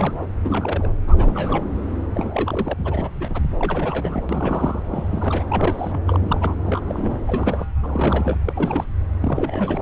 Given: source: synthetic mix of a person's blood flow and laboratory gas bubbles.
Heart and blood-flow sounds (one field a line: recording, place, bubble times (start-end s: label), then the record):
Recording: Doppler ultrasound of blood flow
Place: subclavian vein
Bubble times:
0.00-0.15 s: bubbles
0.44-0.91 s: bubbles
1.07-1.65 s: bubbles
2.15-2.73 s: bubbles
2.78-3.10 s: bubbles
3.19-3.42 s: bubbles
3.58-4.23 s: bubbles
4.29-4.83 s: bubbles
4.92-5.43 s: bubbles
5.50-6.00 s: bubbles
6.06-6.55 s: bubbles
6.64-7.20 s: bubbles
7.26-7.66 s: bubbles
7.83-8.37 s: bubbles
8.44-8.86 s: bubbles
9.20-9.82 s: bubbles
From the record:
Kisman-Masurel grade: 342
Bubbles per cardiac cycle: rolling drumbeat, 9 or more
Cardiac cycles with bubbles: 100%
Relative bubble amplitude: moderate (0.250 to 0.450)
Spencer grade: 3 (all of the cardiac periods contain showers or single bubble signals, but not dominating or overriding the cardiac motion signals)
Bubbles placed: anywhere in the cardiac cycle